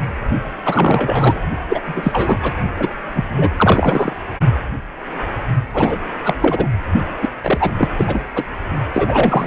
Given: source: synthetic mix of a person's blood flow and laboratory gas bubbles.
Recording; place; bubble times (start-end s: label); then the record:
Doppler ultrasound of blood flow; precordium
0.65-1.41 s: bubbles
1.69-1.81 s: bubbles
1.86-2.52 s: bubbles
2.77-2.97 s: bubbles
3.13-3.25 s: bubbles
3.37-3.48 s: bubbles
3.56-4.13 s: bubbles
5.74-5.99 s: bubbles
6.24-6.33 s: bubbles
6.40-6.69 s: bubbles
7.22-7.29 s: bubbles
7.43-7.71 s: bubbles
7.77-7.88 s: bubbles
7.97-8.21 s: bubbles
8.35-8.43 s: bubbles
8.93-9.47 s: bubbles
From the record:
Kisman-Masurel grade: 333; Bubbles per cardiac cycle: rolling drumbeat, 9 or more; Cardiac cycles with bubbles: 50 to 99%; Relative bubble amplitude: loud (0.450 to 0.775); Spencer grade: 3 (all of the cardiac periods contain showers or single bubble signals, but not dominating or overriding the cardiac motion signals); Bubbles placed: only in the low amplitude regions of the cardiac cycle